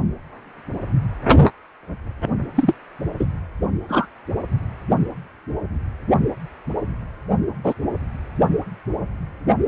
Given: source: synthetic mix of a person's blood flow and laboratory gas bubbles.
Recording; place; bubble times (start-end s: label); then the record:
Doppler ultrasound of blood flow; precordium
2.55-2.74 s: bubbles
3.19-3.25 s: bubbles
3.88-4.07 s: bubbles
7.64-7.74 s: bubbles
From the record:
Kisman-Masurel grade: 123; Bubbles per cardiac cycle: 1 to 2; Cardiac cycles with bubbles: 10 to 50%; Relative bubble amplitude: loud (0.450 to 0.775); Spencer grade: 2 (many but less than half of the cardiac periods contain bubble signals, singularly or in groups); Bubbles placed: only in the low amplitude regions of the cardiac cycle